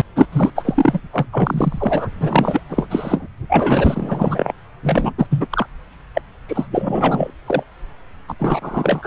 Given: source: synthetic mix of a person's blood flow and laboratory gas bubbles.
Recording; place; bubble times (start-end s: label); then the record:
Doppler ultrasound of blood flow; subclavian vein
0.16-0.28 s: bubbles
0.32-0.51 s: bubbles
0.55-1.01 s: bubbles
1.13-1.26 s: bubbles
1.32-2.11 s: bubbles
2.20-2.61 s: bubbles
2.69-2.87 s: bubbles
2.90-3.27 s: bubbles
3.49-4.52 s: bubbles
4.83-5.13 s: bubbles
5.17-5.26 s: bubbles
5.30-5.47 s: bubbles
5.50-5.67 s: bubbles
6.14-6.21 s: bubbles
6.48-6.67 s: bubbles
6.71-7.30 s: bubbles
7.46-7.63 s: bubbles
8.28-8.33 s: bubbles
8.39-9.07 s: bubbles
From the record:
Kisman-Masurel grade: 343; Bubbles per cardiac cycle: rolling drumbeat, 9 or more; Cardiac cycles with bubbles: 100%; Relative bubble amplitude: loud (0.450 to 0.775); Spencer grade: 3 (all of the cardiac periods contain showers or single bubble signals, but not dominating or overriding the cardiac motion signals); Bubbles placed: anywhere in the cardiac cycle